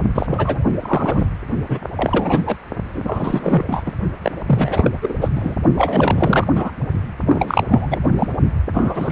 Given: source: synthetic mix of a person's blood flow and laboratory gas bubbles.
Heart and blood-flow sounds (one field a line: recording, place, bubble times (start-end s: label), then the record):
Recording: Doppler ultrasound of blood flow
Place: precordium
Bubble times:
0.14-0.63 s: bubbles
0.80-1.28 s: bubbles
1.69-1.79 s: bubbles
1.96-2.57 s: bubbles
2.84-3.94 s: bubbles
4.22-4.31 s: bubbles
4.46-4.90 s: bubbles
5.02-5.16 s: bubbles
5.19-5.29 s: bubbles
5.35-5.56 s: bubbles
5.75-6.47 s: bubbles
6.55-6.72 s: bubbles
7.26-7.63 s: bubbles
7.67-8.00 s: bubbles
8.19-8.28 s: bubbles
8.74-9.12 s: bubbles
From the record:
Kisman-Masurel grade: 343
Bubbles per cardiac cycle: rolling drumbeat, 9 or more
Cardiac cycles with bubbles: 100%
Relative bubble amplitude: loud (0.450 to 0.775)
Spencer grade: 3 (all of the cardiac periods contain showers or single bubble signals, but not dominating or overriding the cardiac motion signals)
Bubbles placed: only in the low amplitude regions of the cardiac cycle